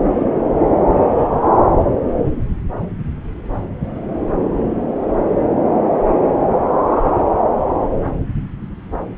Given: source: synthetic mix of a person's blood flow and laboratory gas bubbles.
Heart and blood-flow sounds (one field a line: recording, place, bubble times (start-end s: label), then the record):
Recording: Doppler ultrasound of blood flow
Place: subclavian vein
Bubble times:
no bubbles
From the record:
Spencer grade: 0 (complete lack of bubble signals)